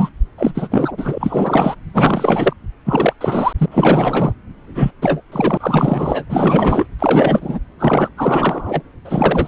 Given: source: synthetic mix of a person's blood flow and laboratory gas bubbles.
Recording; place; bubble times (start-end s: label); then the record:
Doppler ultrasound of blood flow; subclavian vein
0.00-0.09 s: bubbles
0.38-0.52 s: bubbles
0.55-0.68 s: bubbles
0.70-0.92 s: bubbles
0.97-1.75 s: bubbles
1.94-2.53 s: bubbles
2.85-3.13 s: bubbles
3.21-3.53 s: bubbles
3.57-3.66 s: bubbles
3.71-4.33 s: bubbles
4.67-4.91 s: bubbles
5.02-5.21 s: bubbles
5.32-5.58 s: bubbles
5.60-6.26 s: bubbles
6.29-6.87 s: bubbles
6.99-7.59 s: bubbles
7.79-8.08 s: bubbles
8.16-8.82 s: bubbles
9.04-9.48 s: bubbles
From the record:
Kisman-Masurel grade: 444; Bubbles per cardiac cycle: continuous sound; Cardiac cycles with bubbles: 100%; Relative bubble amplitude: maximal (0.775 to 0.999); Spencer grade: 4 (maximum detectable bubble signal sounding continuously throughout systole and diastole of every cardiac period, and overriding the amplitude of the normal cardiac signals); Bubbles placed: anywhere in the cardiac cycle